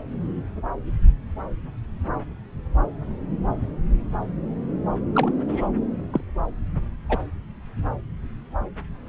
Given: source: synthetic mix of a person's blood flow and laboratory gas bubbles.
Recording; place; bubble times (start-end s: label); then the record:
Doppler ultrasound of blood flow; subclavian vein
5.14-5.33 s: bubbles
5.48-5.68 s: bubbles
6.12-6.21 s: bubbles
7.09-7.18 s: bubbles
From the record:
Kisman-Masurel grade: 122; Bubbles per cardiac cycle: 1 to 2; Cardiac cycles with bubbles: 10 to 50%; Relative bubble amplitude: moderate (0.250 to 0.450); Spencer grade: 2 (many but less than half of the cardiac periods contain bubble signals, singularly or in groups); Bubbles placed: anywhere in the cardiac cycle